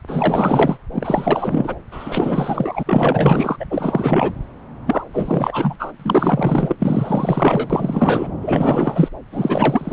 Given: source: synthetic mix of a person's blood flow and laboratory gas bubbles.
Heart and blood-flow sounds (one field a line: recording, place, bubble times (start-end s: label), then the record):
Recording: Doppler ultrasound of blood flow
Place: subclavian vein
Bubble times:
0.07-0.78 s: bubbles
0.91-1.75 s: bubbles
1.91-2.83 s: bubbles
2.85-3.56 s: bubbles
3.59-3.65 s: bubbles
3.70-4.34 s: bubbles
4.86-5.04 s: bubbles
5.13-5.76 s: bubbles
5.79-5.92 s: bubbles
6.00-6.75 s: bubbles
6.79-8.33 s: bubbles
8.41-9.09 s: bubbles
9.32-9.93 s: bubbles
From the record:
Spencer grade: 4 (maximum detectable bubble signal sounding continuously throughout systole and diastole of every cardiac period, and overriding the amplitude of the normal cardiac signals)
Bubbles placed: anywhere in the cardiac cycle